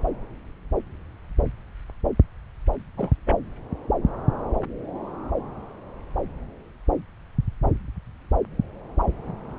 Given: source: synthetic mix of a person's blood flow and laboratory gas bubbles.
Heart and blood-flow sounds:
Doppler ultrasound of blood flow; subclavian vein
2.97-3.11 s: bubbles
3.26-3.44 s: bubbles
From the record:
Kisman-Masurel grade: 111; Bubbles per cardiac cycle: 1 to 2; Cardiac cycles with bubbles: 1 to 10%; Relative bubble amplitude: barely perceptible (0.100 to 0.250); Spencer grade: 1 (occasional bubble signal discernible with the cardiac motion signal, with majority of cardiac periods free of bubbles); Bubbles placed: anywhere in the cardiac cycle

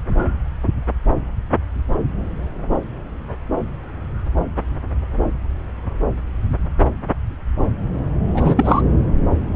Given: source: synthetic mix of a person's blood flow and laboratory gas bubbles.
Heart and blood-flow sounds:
Doppler ultrasound of blood flow; subclavian vein
8.34-8.81 s: bubbles
From the record:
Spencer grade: 1 (occasional bubble signal discernible with the cardiac motion signal, with majority of cardiac periods free of bubbles); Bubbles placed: anywhere in the cardiac cycle

